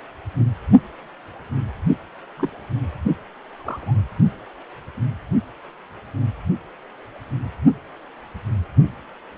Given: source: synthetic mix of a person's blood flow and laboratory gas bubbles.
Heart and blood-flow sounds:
Doppler ultrasound of blood flow; precordium
2.37-2.50 s: bubbles
3.56-3.96 s: bubbles
From the record:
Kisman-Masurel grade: 121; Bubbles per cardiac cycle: 1 to 2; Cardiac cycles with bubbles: 10 to 50%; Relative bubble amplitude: barely perceptible (0.100 to 0.250); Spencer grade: 2 (many but less than half of the cardiac periods contain bubble signals, singularly or in groups); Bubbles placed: only in the low amplitude regions of the cardiac cycle

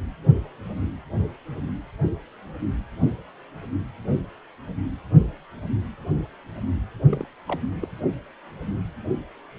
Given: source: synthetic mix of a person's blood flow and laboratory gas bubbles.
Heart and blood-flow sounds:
Doppler ultrasound of blood flow; precordium
7.09-7.27 s: bubbles
7.47-7.60 s: bubbles
7.81-7.88 s: bubbles
From the record:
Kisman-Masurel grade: 211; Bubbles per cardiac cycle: several, 3 to 8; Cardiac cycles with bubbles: 1 to 10%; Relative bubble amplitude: barely perceptible (0.100 to 0.250); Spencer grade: 1 (occasional bubble signal discernible with the cardiac motion signal, with majority of cardiac periods free of bubbles); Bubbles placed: only in the low amplitude regions of the cardiac cycle

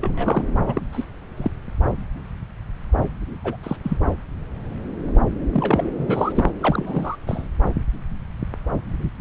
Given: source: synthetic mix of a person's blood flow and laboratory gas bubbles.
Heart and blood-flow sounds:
Doppler ultrasound of blood flow; subclavian vein
0.01-0.44 s: bubbles
0.66-0.81 s: bubbles
0.92-1.04 s: bubbles
1.36-1.51 s: bubbles
3.44-3.56 s: bubbles
3.63-3.76 s: bubbles
3.83-3.97 s: bubbles
5.52-5.91 s: bubbles
5.97-6.50 s: bubbles
6.60-7.16 s: bubbles
7.26-7.47 s: bubbles
9.03-9.10 s: bubbles
From the record:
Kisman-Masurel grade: 232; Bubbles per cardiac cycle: several, 3 to 8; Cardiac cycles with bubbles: 50 to 99%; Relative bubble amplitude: moderate (0.250 to 0.450); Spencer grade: 3 (all of the cardiac periods contain showers or single bubble signals, but not dominating or overriding the cardiac motion signals); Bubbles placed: anywhere in the cardiac cycle

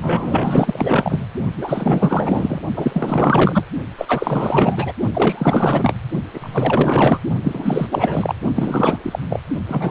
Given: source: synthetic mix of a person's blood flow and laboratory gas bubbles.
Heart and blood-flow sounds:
Doppler ultrasound of blood flow; precordium
0.01-1.25 s: bubbles
1.57-2.60 s: bubbles
2.76-3.64 s: bubbles
3.98-4.92 s: bubbles
5.13-5.94 s: bubbles
6.33-7.19 s: bubbles
7.43-7.87 s: bubbles
7.91-8.35 s: bubbles
8.54-9.19 s: bubbles
9.29-9.40 s: bubbles
9.68-9.91 s: bubbles
From the record:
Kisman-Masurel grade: 444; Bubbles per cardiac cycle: continuous sound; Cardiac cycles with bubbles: 100%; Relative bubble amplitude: maximal (0.775 to 0.999); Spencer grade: 4 (maximum detectable bubble signal sounding continuously throughout systole and diastole of every cardiac period, and overriding the amplitude of the normal cardiac signals); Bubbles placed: only in the low amplitude regions of the cardiac cycle

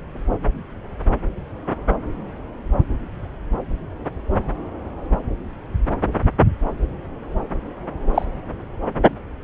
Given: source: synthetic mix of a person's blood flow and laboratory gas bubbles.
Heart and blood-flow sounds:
Doppler ultrasound of blood flow; subclavian vein
8.14-8.26 s: bubbles
From the record:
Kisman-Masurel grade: 113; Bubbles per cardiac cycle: 1 to 2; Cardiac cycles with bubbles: 1 to 10%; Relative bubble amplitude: loud (0.450 to 0.775); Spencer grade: 1 (occasional bubble signal discernible with the cardiac motion signal, with majority of cardiac periods free of bubbles); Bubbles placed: anywhere in the cardiac cycle

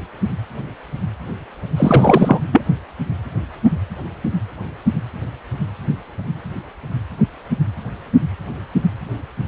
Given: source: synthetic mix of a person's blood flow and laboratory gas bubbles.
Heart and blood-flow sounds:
Doppler ultrasound of blood flow; precordium
1.77-2.40 s: bubbles
2.52-2.61 s: bubbles
From the record:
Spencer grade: 1 (occasional bubble signal discernible with the cardiac motion signal, with majority of cardiac periods free of bubbles); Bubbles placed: only in the low amplitude regions of the cardiac cycle

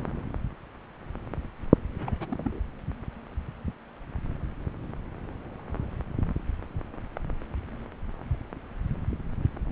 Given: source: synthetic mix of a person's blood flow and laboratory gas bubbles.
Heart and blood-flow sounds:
Doppler ultrasound of blood flow; subclavian vein
1.94-2.60 s: bubbles
From the record:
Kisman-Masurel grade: 221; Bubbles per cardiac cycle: several, 3 to 8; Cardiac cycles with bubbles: 10 to 50%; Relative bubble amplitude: barely perceptible (0.100 to 0.250); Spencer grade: 2 (many but less than half of the cardiac periods contain bubble signals, singularly or in groups); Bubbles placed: anywhere in the cardiac cycle

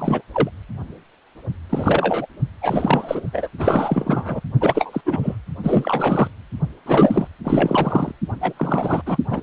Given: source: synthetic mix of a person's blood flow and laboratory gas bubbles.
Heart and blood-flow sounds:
Doppler ultrasound of blood flow; precordium
0.00-0.22 s: bubbles
0.34-0.50 s: bubbles
1.69-2.26 s: bubbles
2.61-3.49 s: bubbles
3.58-4.40 s: bubbles
4.60-5.01 s: bubbles
5.05-5.35 s: bubbles
5.62-6.28 s: bubbles
6.86-7.27 s: bubbles
7.44-8.12 s: bubbles
8.41-8.53 s: bubbles
8.56-9.02 s: bubbles
9.06-9.18 s: bubbles
9.29-9.43 s: bubbles
From the record:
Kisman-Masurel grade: 333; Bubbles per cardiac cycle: rolling drumbeat, 9 or more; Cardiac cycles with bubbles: 50 to 99%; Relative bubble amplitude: loud (0.450 to 0.775); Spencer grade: 3 (all of the cardiac periods contain showers or single bubble signals, but not dominating or overriding the cardiac motion signals); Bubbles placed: anywhere in the cardiac cycle

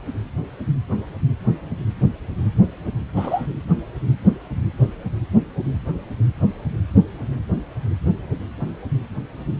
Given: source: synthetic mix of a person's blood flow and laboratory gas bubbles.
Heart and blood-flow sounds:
Doppler ultrasound of blood flow; precordium
3.16-3.47 s: bubbles
From the record:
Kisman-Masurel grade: 112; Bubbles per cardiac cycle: 1 to 2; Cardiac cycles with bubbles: 1 to 10%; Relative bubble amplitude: moderate (0.250 to 0.450); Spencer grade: 1 (occasional bubble signal discernible with the cardiac motion signal, with majority of cardiac periods free of bubbles); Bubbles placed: anywhere in the cardiac cycle

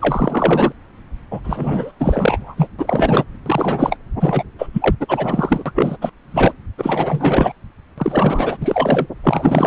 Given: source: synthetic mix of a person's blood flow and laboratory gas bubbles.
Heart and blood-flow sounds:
Doppler ultrasound of blood flow; subclavian vein
0.00-0.72 s: bubbles
1.30-1.40 s: bubbles
1.44-1.92 s: bubbles
1.99-2.68 s: bubbles
2.79-3.24 s: bubbles
3.46-3.96 s: bubbles
4.19-4.43 s: bubbles
4.58-4.69 s: bubbles
4.73-4.96 s: bubbles
5.00-5.71 s: bubbles
5.75-5.97 s: bubbles
6.01-6.10 s: bubbles
6.31-6.54 s: bubbles
6.77-7.52 s: bubbles
7.98-8.58 s: bubbles
8.61-9.07 s: bubbles
9.24-9.67 s: bubbles
From the record:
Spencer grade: 4 (maximum detectable bubble signal sounding continuously throughout systole and diastole of every cardiac period, and overriding the amplitude of the normal cardiac signals); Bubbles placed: anywhere in the cardiac cycle

